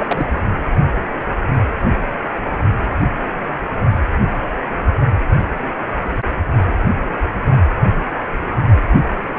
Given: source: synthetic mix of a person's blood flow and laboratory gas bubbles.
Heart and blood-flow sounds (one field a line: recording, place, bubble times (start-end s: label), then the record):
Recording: Doppler ultrasound of blood flow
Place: precordium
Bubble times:
0.00-0.28 s: bubbles
From the record:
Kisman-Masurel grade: 222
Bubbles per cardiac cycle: several, 3 to 8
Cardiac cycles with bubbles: 10 to 50%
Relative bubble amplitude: moderate (0.250 to 0.450)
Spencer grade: 2 (many but less than half of the cardiac periods contain bubble signals, singularly or in groups)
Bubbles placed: only in the low amplitude regions of the cardiac cycle